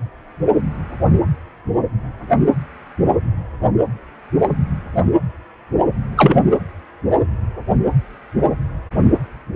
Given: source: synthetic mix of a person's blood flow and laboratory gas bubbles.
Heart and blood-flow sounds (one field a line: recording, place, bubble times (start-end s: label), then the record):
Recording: Doppler ultrasound of blood flow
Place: precordium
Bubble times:
6.16-6.41 s: bubbles
From the record:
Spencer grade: 1 (occasional bubble signal discernible with the cardiac motion signal, with majority of cardiac periods free of bubbles)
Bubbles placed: anywhere in the cardiac cycle